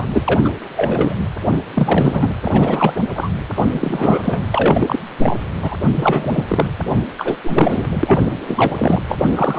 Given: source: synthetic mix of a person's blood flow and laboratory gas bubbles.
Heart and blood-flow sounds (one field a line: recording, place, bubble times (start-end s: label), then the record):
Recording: Doppler ultrasound of blood flow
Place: precordium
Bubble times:
0.00-0.05 s: bubbles
0.12-0.49 s: bubbles
0.77-1.16 s: bubbles
1.45-1.62 s: bubbles
1.75-2.32 s: bubbles
2.42-2.93 s: bubbles
2.96-3.01 s: bubbles
3.16-3.30 s: bubbles
3.55-3.64 s: bubbles
3.73-4.41 s: bubbles
4.51-5.00 s: bubbles
5.22-5.38 s: bubbles
5.61-5.76 s: bubbles
5.96-6.44 s: bubbles
6.48-6.65 s: bubbles
7.17-7.40 s: bubbles
7.43-7.87 s: bubbles
7.93-8.20 s: bubbles
8.48-9.02 s: bubbles
9.08-9.59 s: bubbles
From the record:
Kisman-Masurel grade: 343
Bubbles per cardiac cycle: rolling drumbeat, 9 or more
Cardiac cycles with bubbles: 100%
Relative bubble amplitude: loud (0.450 to 0.775)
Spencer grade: 3 (all of the cardiac periods contain showers or single bubble signals, but not dominating or overriding the cardiac motion signals)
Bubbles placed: anywhere in the cardiac cycle